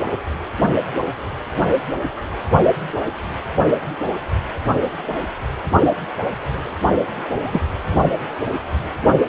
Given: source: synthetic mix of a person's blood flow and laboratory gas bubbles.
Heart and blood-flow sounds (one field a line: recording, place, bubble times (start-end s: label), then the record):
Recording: Doppler ultrasound of blood flow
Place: precordium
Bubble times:
7.42-7.61 s: bubbles
From the record:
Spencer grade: 2 (many but less than half of the cardiac periods contain bubble signals, singularly or in groups)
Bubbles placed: anywhere in the cardiac cycle